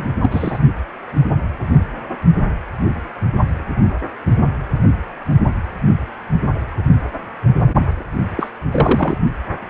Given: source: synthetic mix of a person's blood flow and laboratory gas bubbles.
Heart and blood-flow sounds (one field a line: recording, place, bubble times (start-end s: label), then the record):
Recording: Doppler ultrasound of blood flow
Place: precordium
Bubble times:
0.00-0.06 s: bubbles
0.22-0.59 s: bubbles
8.37-8.50 s: bubbles
8.71-9.16 s: bubbles
From the record:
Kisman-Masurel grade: 222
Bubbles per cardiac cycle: several, 3 to 8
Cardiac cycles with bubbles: 10 to 50%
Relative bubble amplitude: moderate (0.250 to 0.450)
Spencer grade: 2 (many but less than half of the cardiac periods contain bubble signals, singularly or in groups)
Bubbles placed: only in the low amplitude regions of the cardiac cycle